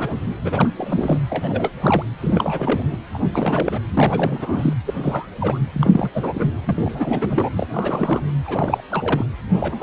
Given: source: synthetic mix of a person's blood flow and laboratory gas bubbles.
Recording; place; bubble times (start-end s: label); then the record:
Doppler ultrasound of blood flow; precordium
0.00-0.35 s: bubbles
0.44-0.70 s: bubbles
0.77-1.18 s: bubbles
1.30-1.70 s: bubbles
1.80-2.03 s: bubbles
2.22-2.97 s: bubbles
3.14-3.19 s: bubbles
3.33-3.79 s: bubbles
3.94-4.73 s: bubbles
4.86-5.27 s: bubbles
5.40-5.59 s: bubbles
5.72-6.09 s: bubbles
6.14-6.50 s: bubbles
6.64-7.49 s: bubbles
7.56-7.67 s: bubbles
7.73-8.21 s: bubbles
8.45-8.82 s: bubbles
8.90-9.25 s: bubbles
9.54-9.83 s: bubbles
From the record:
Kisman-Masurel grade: 342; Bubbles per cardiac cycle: rolling drumbeat, 9 or more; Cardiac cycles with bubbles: 100%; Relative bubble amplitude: moderate (0.250 to 0.450); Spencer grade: 3 (all of the cardiac periods contain showers or single bubble signals, but not dominating or overriding the cardiac motion signals); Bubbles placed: anywhere in the cardiac cycle